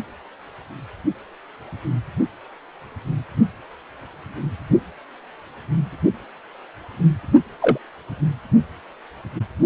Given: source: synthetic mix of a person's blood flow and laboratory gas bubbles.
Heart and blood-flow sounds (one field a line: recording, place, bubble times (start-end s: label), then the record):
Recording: Doppler ultrasound of blood flow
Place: precordium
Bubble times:
7.62-7.78 s: bubbles
From the record:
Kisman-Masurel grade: 113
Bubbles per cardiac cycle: 1 to 2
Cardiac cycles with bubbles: 1 to 10%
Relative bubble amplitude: loud (0.450 to 0.775)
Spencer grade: 1 (occasional bubble signal discernible with the cardiac motion signal, with majority of cardiac periods free of bubbles)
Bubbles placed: only in the low amplitude regions of the cardiac cycle